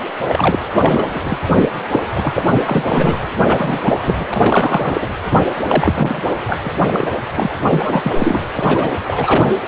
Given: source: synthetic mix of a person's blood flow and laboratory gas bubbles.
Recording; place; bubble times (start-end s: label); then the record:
Doppler ultrasound of blood flow; precordium
0.23-0.59 s: bubbles
0.77-1.19 s: bubbles
1.26-1.38 s: bubbles
1.51-1.68 s: bubbles
1.93-2.03 s: bubbles
2.12-2.47 s: bubbles
2.50-3.20 s: bubbles
3.45-4.25 s: bubbles
4.28-5.06 s: bubbles
5.67-6.22 s: bubbles
6.44-6.54 s: bubbles
6.63-7.12 s: bubbles
7.31-7.50 s: bubbles
7.71-8.51 s: bubbles
8.56-8.99 s: bubbles
9.04-9.50 s: bubbles
9.62-9.68 s: bubbles
From the record:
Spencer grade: 3 (all of the cardiac periods contain showers or single bubble signals, but not dominating or overriding the cardiac motion signals); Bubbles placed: anywhere in the cardiac cycle